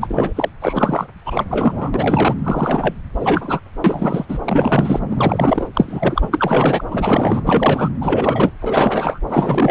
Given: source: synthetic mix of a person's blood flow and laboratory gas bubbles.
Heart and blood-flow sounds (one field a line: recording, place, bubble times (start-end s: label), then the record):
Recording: Doppler ultrasound of blood flow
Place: subclavian vein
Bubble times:
0.01-0.33 s: bubbles
0.35-0.49 s: bubbles
0.60-1.07 s: bubbles
1.25-1.91 s: bubbles
1.94-2.35 s: bubbles
2.44-2.94 s: bubbles
3.19-3.60 s: bubbles
3.84-4.25 s: bubbles
4.29-4.38 s: bubbles
4.44-5.00 s: bubbles
5.09-5.68 s: bubbles
5.73-6.29 s: bubbles
6.33-6.84 s: bubbles
6.91-7.42 s: bubbles
7.45-7.91 s: bubbles
8.01-8.52 s: bubbles
8.61-9.19 s: bubbles
9.28-9.71 s: bubbles
From the record:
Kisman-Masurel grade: 343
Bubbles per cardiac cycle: rolling drumbeat, 9 or more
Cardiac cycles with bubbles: 100%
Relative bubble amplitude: loud (0.450 to 0.775)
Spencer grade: 3 (all of the cardiac periods contain showers or single bubble signals, but not dominating or overriding the cardiac motion signals)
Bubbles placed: anywhere in the cardiac cycle